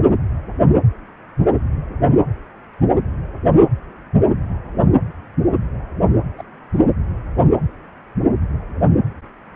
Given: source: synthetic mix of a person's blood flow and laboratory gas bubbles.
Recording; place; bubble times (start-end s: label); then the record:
Doppler ultrasound of blood flow; precordium
6.38-6.43 s: bubbles
6.74-6.83 s: bubbles
From the record:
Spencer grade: 1 (occasional bubble signal discernible with the cardiac motion signal, with majority of cardiac periods free of bubbles); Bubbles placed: anywhere in the cardiac cycle